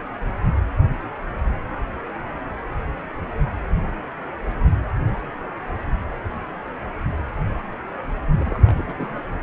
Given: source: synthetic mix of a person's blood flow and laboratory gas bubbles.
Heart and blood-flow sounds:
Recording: Doppler ultrasound of blood flow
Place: precordium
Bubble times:
8.38-8.82 s: bubbles
8.86-9.21 s: bubbles
From the record:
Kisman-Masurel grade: 211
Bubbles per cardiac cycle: several, 3 to 8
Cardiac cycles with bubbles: 1 to 10%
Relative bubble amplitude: barely perceptible (0.100 to 0.250)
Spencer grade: 1 (occasional bubble signal discernible with the cardiac motion signal, with majority of cardiac periods free of bubbles)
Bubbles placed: anywhere in the cardiac cycle

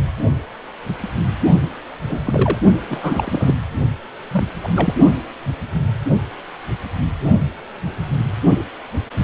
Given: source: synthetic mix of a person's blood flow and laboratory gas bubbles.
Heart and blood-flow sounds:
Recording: Doppler ultrasound of blood flow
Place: precordium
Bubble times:
2.08-2.58 s: bubbles
2.88-3.54 s: bubbles
4.31-4.45 s: bubbles
4.63-4.68 s: bubbles
4.75-4.94 s: bubbles
From the record:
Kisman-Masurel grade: 222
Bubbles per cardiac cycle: several, 3 to 8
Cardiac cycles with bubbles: 10 to 50%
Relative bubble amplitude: moderate (0.250 to 0.450)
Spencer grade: 2 (many but less than half of the cardiac periods contain bubble signals, singularly or in groups)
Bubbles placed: only in the low amplitude regions of the cardiac cycle

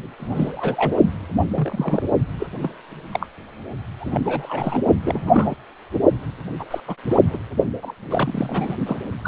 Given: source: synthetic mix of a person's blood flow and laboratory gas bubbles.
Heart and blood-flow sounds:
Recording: Doppler ultrasound of blood flow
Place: precordium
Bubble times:
0.17-0.99 s: bubbles
1.55-2.02 s: bubbles
2.39-2.47 s: bubbles
2.62-2.73 s: bubbles
3.12-3.27 s: bubbles
4.00-4.83 s: bubbles
5.02-5.54 s: bubbles
6.59-6.64 s: bubbles
6.70-6.80 s: bubbles
6.86-6.94 s: bubbles
7.07-7.18 s: bubbles
7.21-7.37 s: bubbles
7.82-7.93 s: bubbles
8.10-8.76 s: bubbles
8.87-8.96 s: bubbles
9.24-9.28 s: bubbles
From the record:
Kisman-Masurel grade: 242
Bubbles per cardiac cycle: several, 3 to 8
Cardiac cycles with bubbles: 100%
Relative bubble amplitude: moderate (0.250 to 0.450)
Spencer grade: 3 (all of the cardiac periods contain showers or single bubble signals, but not dominating or overriding the cardiac motion signals)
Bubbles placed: only in the low amplitude regions of the cardiac cycle

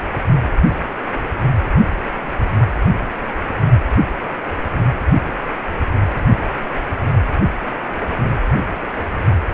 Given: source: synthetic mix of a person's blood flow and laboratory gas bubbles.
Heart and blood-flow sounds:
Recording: Doppler ultrasound of blood flow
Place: precordium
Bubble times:
8.93-9.07 s: bubbles
9.18-9.25 s: bubbles
From the record:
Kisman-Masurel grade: 111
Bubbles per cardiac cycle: 1 to 2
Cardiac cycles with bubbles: 1 to 10%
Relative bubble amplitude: barely perceptible (0.100 to 0.250)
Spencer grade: 1 (occasional bubble signal discernible with the cardiac motion signal, with majority of cardiac periods free of bubbles)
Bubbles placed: anywhere in the cardiac cycle

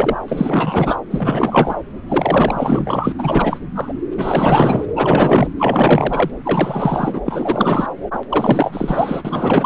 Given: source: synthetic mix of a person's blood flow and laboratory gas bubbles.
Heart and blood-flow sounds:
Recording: Doppler ultrasound of blood flow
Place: subclavian vein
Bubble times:
0.00-0.16 s: bubbles
0.28-0.99 s: bubbles
1.10-1.75 s: bubbles
2.08-3.12 s: bubbles
3.18-3.59 s: bubbles
3.75-3.93 s: bubbles
4.17-4.87 s: bubbles
4.89-4.93 s: bubbles
4.96-5.48 s: bubbles
5.58-6.30 s: bubbles
6.44-7.20 s: bubbles
7.25-7.89 s: bubbles
8.13-8.18 s: bubbles
8.29-9.22 s: bubbles
9.25-9.66 s: bubbles
From the record:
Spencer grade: 4 (maximum detectable bubble signal sounding continuously throughout systole and diastole of every cardiac period, and overriding the amplitude of the normal cardiac signals)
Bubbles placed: anywhere in the cardiac cycle

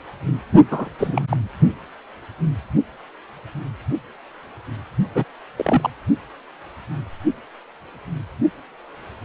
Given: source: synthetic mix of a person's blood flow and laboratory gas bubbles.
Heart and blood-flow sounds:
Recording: Doppler ultrasound of blood flow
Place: precordium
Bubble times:
0.70-0.89 s: bubbles
0.98-1.25 s: bubbles
1.29-1.37 s: bubbles
5.15-5.25 s: bubbles
5.56-5.90 s: bubbles
From the record:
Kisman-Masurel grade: 222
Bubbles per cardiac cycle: several, 3 to 8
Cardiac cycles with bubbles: 10 to 50%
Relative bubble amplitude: moderate (0.250 to 0.450)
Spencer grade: 2 (many but less than half of the cardiac periods contain bubble signals, singularly or in groups)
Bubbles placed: only in the low amplitude regions of the cardiac cycle

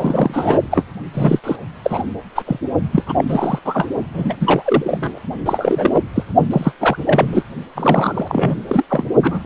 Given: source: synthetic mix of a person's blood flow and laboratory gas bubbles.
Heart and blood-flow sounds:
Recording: Doppler ultrasound of blood flow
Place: precordium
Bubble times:
0.00-0.60 s: bubbles
0.71-0.84 s: bubbles
1.14-1.39 s: bubbles
1.44-1.56 s: bubbles
1.84-2.03 s: bubbles
2.35-2.43 s: bubbles
2.46-2.59 s: bubbles
2.92-3.02 s: bubbles
3.07-3.13 s: bubbles
3.17-3.25 s: bubbles
3.27-3.59 s: bubbles
3.65-3.88 s: bubbles
4.14-4.36 s: bubbles
4.41-5.20 s: bubbles
5.45-6.03 s: bubbles
6.15-6.24 s: bubbles
6.50-6.72 s: bubbles
6.79-6.97 s: bubbles
7.06-7.42 s: bubbles
7.75-8.62 s: bubbles
8.67-8.85 s: bubbles
8.89-9.07 s: bubbles
9.22-9.46 s: bubbles
From the record:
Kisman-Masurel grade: 333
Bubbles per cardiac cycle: rolling drumbeat, 9 or more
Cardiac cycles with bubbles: 50 to 99%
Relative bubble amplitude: loud (0.450 to 0.775)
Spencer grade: 3 (all of the cardiac periods contain showers or single bubble signals, but not dominating or overriding the cardiac motion signals)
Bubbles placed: only in the low amplitude regions of the cardiac cycle

